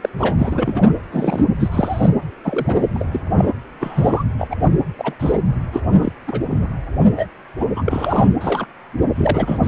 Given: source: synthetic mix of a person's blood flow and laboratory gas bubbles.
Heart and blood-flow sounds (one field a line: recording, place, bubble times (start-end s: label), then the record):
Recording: Doppler ultrasound of blood flow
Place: precordium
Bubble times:
0.01-0.09 s: bubbles
0.19-0.36 s: bubbles
0.38-0.93 s: bubbles
1.10-1.46 s: bubbles
1.59-2.09 s: bubbles
2.43-2.88 s: bubbles
2.94-3.06 s: bubbles
3.12-3.20 s: bubbles
3.30-3.52 s: bubbles
3.80-4.23 s: bubbles
4.38-4.48 s: bubbles
4.50-4.56 s: bubbles
4.58-4.73 s: bubbles
4.98-5.14 s: bubbles
5.19-5.41 s: bubbles
5.72-5.80 s: bubbles
5.96-6.12 s: bubbles
6.27-6.40 s: bubbles
6.49-6.67 s: bubbles
7.00-7.12 s: bubbles
7.16-7.26 s: bubbles
7.60-7.66 s: bubbles
7.75-8.32 s: bubbles
8.41-8.67 s: bubbles
9.15-9.68 s: bubbles
From the record:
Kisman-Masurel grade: 242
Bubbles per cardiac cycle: several, 3 to 8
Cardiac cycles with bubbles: 100%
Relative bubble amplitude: moderate (0.250 to 0.450)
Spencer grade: 3 (all of the cardiac periods contain showers or single bubble signals, but not dominating or overriding the cardiac motion signals)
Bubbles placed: anywhere in the cardiac cycle